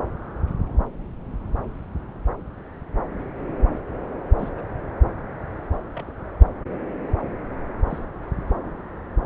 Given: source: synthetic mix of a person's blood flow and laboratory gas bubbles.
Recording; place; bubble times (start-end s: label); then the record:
Doppler ultrasound of blood flow; subclavian vein
4.39-4.49 s: bubbles
4.57-4.62 s: bubbles
5.95-6.03 s: bubbles
6.07-6.10 s: bubbles
7.84-7.99 s: bubbles
8.64-8.69 s: bubbles
From the record:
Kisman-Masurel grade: 121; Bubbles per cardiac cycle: 1 to 2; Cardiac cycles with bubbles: 10 to 50%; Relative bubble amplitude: barely perceptible (0.100 to 0.250); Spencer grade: 2 (many but less than half of the cardiac periods contain bubble signals, singularly or in groups); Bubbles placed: anywhere in the cardiac cycle